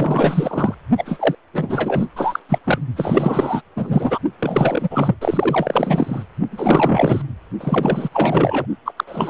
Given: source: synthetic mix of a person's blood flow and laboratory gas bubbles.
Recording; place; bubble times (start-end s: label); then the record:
Doppler ultrasound of blood flow; precordium
0.00-0.74 s: bubbles
0.97-1.35 s: bubbles
1.53-2.06 s: bubbles
2.16-2.40 s: bubbles
2.49-2.58 s: bubbles
2.64-2.78 s: bubbles
2.96-3.61 s: bubbles
3.76-4.20 s: bubbles
4.39-5.15 s: bubbles
5.21-6.23 s: bubbles
6.52-7.22 s: bubbles
7.60-8.09 s: bubbles
8.13-8.66 s: bubbles
8.85-8.92 s: bubbles
8.97-9.04 s: bubbles
9.07-9.30 s: bubbles
From the record:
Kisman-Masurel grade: 444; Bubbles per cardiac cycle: continuous sound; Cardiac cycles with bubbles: 100%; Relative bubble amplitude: maximal (0.775 to 0.999); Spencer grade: 4 (maximum detectable bubble signal sounding continuously throughout systole and diastole of every cardiac period, and overriding the amplitude of the normal cardiac signals); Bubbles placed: only in the low amplitude regions of the cardiac cycle